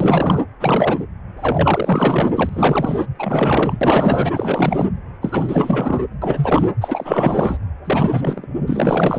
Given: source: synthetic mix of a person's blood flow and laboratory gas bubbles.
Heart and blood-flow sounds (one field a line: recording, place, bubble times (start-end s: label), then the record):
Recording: Doppler ultrasound of blood flow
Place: precordium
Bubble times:
0.00-0.44 s: bubbles
0.59-1.05 s: bubbles
1.35-2.30 s: bubbles
2.35-3.06 s: bubbles
3.19-4.87 s: bubbles
5.21-6.04 s: bubbles
6.21-6.70 s: bubbles
6.81-7.58 s: bubbles
7.85-8.47 s: bubbles
8.67-9.19 s: bubbles
From the record:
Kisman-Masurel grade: 444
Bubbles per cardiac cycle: continuous sound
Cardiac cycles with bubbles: 100%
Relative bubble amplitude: maximal (0.775 to 0.999)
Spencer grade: 4 (maximum detectable bubble signal sounding continuously throughout systole and diastole of every cardiac period, and overriding the amplitude of the normal cardiac signals)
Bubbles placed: anywhere in the cardiac cycle